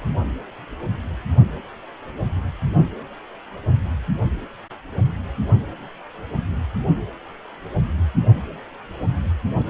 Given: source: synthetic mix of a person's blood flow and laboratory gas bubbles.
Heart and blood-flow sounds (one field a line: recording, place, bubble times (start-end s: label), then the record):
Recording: Doppler ultrasound of blood flow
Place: precordium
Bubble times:
no bubbles
From the record:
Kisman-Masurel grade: 000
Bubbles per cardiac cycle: 0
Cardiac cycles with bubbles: 0%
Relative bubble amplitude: no bubbles discernible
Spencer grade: 0 (complete lack of bubble signals)